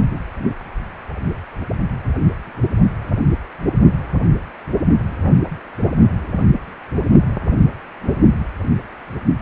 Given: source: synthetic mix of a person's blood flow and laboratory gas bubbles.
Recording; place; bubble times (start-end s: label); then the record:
Doppler ultrasound of blood flow; precordium
no bubbles
From the record:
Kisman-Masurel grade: 000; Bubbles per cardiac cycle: 0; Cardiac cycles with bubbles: 0%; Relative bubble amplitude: no bubbles discernible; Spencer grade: 0 (complete lack of bubble signals)